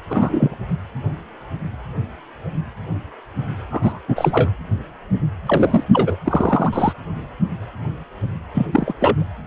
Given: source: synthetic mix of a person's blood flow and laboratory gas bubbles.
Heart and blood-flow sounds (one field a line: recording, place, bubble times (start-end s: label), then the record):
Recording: Doppler ultrasound of blood flow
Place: precordium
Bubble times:
0.09-0.54 s: bubbles
3.70-4.00 s: bubbles
4.08-4.50 s: bubbles
5.46-5.84 s: bubbles
5.93-6.17 s: bubbles
6.25-6.93 s: bubbles
8.54-8.67 s: bubbles
8.72-8.94 s: bubbles
8.99-9.25 s: bubbles
From the record:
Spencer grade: 3 (all of the cardiac periods contain showers or single bubble signals, but not dominating or overriding the cardiac motion signals)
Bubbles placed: anywhere in the cardiac cycle